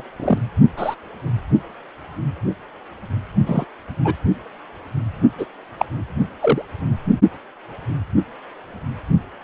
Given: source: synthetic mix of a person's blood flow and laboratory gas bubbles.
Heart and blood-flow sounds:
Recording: Doppler ultrasound of blood flow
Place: precordium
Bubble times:
0.00-0.02 s: bubbles
0.19-0.38 s: bubbles
0.77-0.95 s: bubbles
3.46-3.65 s: bubbles
4.04-4.14 s: bubbles
5.38-5.46 s: bubbles
5.79-5.85 s: bubbles
6.41-6.62 s: bubbles
From the record:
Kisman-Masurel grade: 123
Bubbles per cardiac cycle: 1 to 2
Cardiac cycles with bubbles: 10 to 50%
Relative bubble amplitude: loud (0.450 to 0.775)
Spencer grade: 2 (many but less than half of the cardiac periods contain bubble signals, singularly or in groups)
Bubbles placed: only in the low amplitude regions of the cardiac cycle

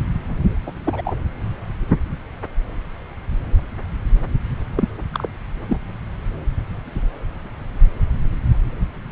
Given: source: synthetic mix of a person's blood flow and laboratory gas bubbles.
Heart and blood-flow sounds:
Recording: Doppler ultrasound of blood flow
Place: subclavian vein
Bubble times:
0.66-0.71 s: bubbles
0.85-1.02 s: bubbles
1.04-1.14 s: bubbles
4.76-4.88 s: bubbles
5.13-5.28 s: bubbles
5.68-5.79 s: bubbles
From the record:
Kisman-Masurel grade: 222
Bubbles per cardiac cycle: several, 3 to 8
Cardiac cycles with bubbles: 10 to 50%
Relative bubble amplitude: moderate (0.250 to 0.450)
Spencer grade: 2 (many but less than half of the cardiac periods contain bubble signals, singularly or in groups)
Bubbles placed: anywhere in the cardiac cycle

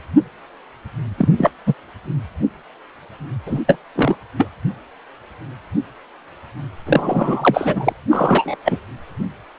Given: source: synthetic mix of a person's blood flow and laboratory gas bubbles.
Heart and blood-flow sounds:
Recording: Doppler ultrasound of blood flow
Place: precordium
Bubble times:
1.18-1.28 s: bubbles
1.38-1.50 s: bubbles
1.66-1.74 s: bubbles
3.47-3.62 s: bubbles
3.67-3.77 s: bubbles
3.95-4.16 s: bubbles
4.38-4.49 s: bubbles
6.86-7.92 s: bubbles
8.10-8.56 s: bubbles
8.64-8.78 s: bubbles
From the record:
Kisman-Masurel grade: 233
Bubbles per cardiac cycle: several, 3 to 8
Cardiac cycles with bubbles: 50 to 99%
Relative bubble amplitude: loud (0.450 to 0.775)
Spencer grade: 3 (all of the cardiac periods contain showers or single bubble signals, but not dominating or overriding the cardiac motion signals)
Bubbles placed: anywhere in the cardiac cycle

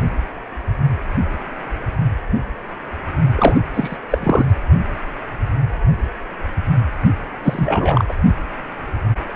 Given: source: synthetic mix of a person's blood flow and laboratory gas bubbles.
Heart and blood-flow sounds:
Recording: Doppler ultrasound of blood flow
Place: precordium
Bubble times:
3.36-3.61 s: bubbles
3.74-3.97 s: bubbles
4.10-4.45 s: bubbles
7.44-8.05 s: bubbles
8.08-8.15 s: bubbles
From the record:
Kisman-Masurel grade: 223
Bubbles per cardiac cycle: several, 3 to 8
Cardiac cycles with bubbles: 10 to 50%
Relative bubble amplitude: loud (0.450 to 0.775)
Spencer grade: 2 (many but less than half of the cardiac periods contain bubble signals, singularly or in groups)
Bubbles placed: only in the low amplitude regions of the cardiac cycle

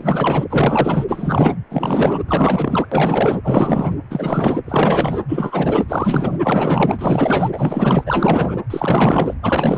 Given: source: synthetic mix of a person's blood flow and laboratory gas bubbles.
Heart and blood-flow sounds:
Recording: Doppler ultrasound of blood flow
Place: precordium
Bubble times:
0.00-0.45 s: bubbles
0.49-1.05 s: bubbles
1.08-1.57 s: bubbles
1.70-2.20 s: bubbles
2.28-2.88 s: bubbles
2.92-3.40 s: bubbles
3.44-3.92 s: bubbles
4.10-4.57 s: bubbles
4.65-5.20 s: bubbles
5.28-5.85 s: bubbles
5.88-6.39 s: bubbles
6.43-7.50 s: bubbles
7.52-8.59 s: bubbles
8.70-9.34 s: bubbles
9.42-9.78 s: bubbles
From the record:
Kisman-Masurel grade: 444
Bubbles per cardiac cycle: continuous sound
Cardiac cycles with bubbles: 100%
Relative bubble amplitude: maximal (0.775 to 0.999)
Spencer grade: 4 (maximum detectable bubble signal sounding continuously throughout systole and diastole of every cardiac period, and overriding the amplitude of the normal cardiac signals)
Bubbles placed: anywhere in the cardiac cycle

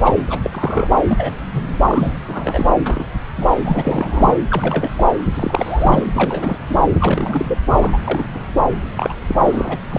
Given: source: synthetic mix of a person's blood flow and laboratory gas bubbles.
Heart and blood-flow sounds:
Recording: Doppler ultrasound of blood flow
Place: subclavian vein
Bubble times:
0.04-0.12 s: bubbles
0.27-0.39 s: bubbles
0.43-0.50 s: bubbles
0.53-0.98 s: bubbles
1.07-1.35 s: bubbles
1.54-1.62 s: bubbles
1.89-2.14 s: bubbles
2.28-2.73 s: bubbles
2.86-3.05 s: bubbles
3.36-3.46 s: bubbles
3.65-4.34 s: bubbles
4.50-5.10 s: bubbles
5.34-6.07 s: bubbles
6.14-6.58 s: bubbles
6.69-6.75 s: bubbles
6.94-7.58 s: bubbles
7.79-7.99 s: bubbles
8.04-8.26 s: bubbles
8.35-8.44 s: bubbles
8.96-9.13 s: bubbles
9.28-9.36 s: bubbles
9.42-9.79 s: bubbles
9.90-9.99 s: bubbles
From the record:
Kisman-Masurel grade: 242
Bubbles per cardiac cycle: several, 3 to 8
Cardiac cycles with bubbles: 100%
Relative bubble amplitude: moderate (0.250 to 0.450)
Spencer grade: 3 (all of the cardiac periods contain showers or single bubble signals, but not dominating or overriding the cardiac motion signals)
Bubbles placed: anywhere in the cardiac cycle

